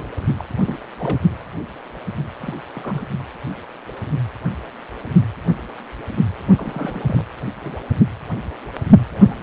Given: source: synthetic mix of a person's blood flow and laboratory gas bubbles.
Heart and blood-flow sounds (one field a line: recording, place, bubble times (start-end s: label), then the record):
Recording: Doppler ultrasound of blood flow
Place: precordium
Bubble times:
0.00-0.10 s: bubbles
0.38-0.44 s: bubbles
0.61-0.79 s: bubbles
0.99-1.20 s: bubbles
2.40-2.54 s: bubbles
2.74-3.03 s: bubbles
6.57-7.23 s: bubbles
7.62-7.75 s: bubbles
9.12-9.43 s: bubbles
From the record:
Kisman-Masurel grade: 221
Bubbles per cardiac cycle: several, 3 to 8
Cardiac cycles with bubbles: 10 to 50%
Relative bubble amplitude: barely perceptible (0.100 to 0.250)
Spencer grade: 2 (many but less than half of the cardiac periods contain bubble signals, singularly or in groups)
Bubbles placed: only in the low amplitude regions of the cardiac cycle